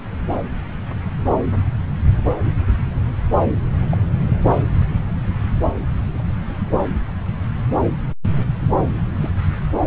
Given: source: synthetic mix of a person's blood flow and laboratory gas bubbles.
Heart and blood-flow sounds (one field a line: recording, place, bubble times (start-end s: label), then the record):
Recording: Doppler ultrasound of blood flow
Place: subclavian vein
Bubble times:
2.13-2.22 s: bubbles
2.39-2.42 s: bubbles
3.91-3.98 s: bubbles
8.93-9.00 s: bubbles
9.20-9.30 s: bubbles
From the record:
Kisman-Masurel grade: 121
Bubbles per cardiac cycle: 1 to 2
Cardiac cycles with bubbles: 10 to 50%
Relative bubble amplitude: barely perceptible (0.100 to 0.250)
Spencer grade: 2 (many but less than half of the cardiac periods contain bubble signals, singularly or in groups)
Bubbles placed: anywhere in the cardiac cycle